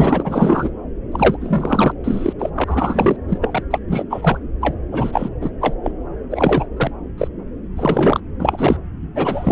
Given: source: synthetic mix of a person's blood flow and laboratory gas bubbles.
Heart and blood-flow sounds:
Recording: Doppler ultrasound of blood flow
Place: subclavian vein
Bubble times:
0.00-0.70 s: bubbles
1.11-1.92 s: bubbles
2.04-2.33 s: bubbles
2.39-2.49 s: bubbles
2.55-2.64 s: bubbles
2.67-3.17 s: bubbles
3.28-3.38 s: bubbles
3.41-3.63 s: bubbles
3.70-3.78 s: bubbles
3.88-4.04 s: bubbles
4.10-4.38 s: bubbles
4.61-4.75 s: bubbles
4.92-5.29 s: bubbles
5.41-5.50 s: bubbles
5.60-5.76 s: bubbles
5.83-5.92 s: bubbles
6.30-6.66 s: bubbles
6.77-6.92 s: bubbles
7.18-7.28 s: bubbles
7.77-8.20 s: bubbles
8.39-8.77 s: bubbles
9.16-9.52 s: bubbles
From the record:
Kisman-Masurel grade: 243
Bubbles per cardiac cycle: several, 3 to 8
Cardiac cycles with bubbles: 100%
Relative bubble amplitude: loud (0.450 to 0.775)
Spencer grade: 3 (all of the cardiac periods contain showers or single bubble signals, but not dominating or overriding the cardiac motion signals)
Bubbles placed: anywhere in the cardiac cycle

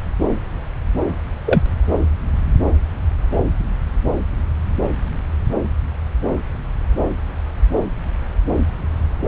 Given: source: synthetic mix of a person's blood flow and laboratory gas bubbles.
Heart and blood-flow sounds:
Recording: Doppler ultrasound of blood flow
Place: subclavian vein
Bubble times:
1.46-1.62 s: bubbles
From the record:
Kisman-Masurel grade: 113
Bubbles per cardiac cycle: 1 to 2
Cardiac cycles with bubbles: 1 to 10%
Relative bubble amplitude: loud (0.450 to 0.775)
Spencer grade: 1 (occasional bubble signal discernible with the cardiac motion signal, with majority of cardiac periods free of bubbles)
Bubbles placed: anywhere in the cardiac cycle

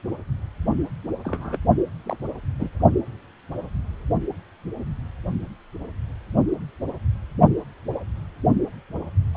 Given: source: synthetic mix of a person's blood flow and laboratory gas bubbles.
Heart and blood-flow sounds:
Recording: Doppler ultrasound of blood flow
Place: precordium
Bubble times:
1.23-1.58 s: bubbles
2.03-2.17 s: bubbles
2.58-2.69 s: bubbles
9.34-9.37 s: bubbles
From the record:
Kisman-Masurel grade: 122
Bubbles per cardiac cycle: 1 to 2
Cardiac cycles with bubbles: 10 to 50%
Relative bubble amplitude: moderate (0.250 to 0.450)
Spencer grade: 2 (many but less than half of the cardiac periods contain bubble signals, singularly or in groups)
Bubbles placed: only in the low amplitude regions of the cardiac cycle

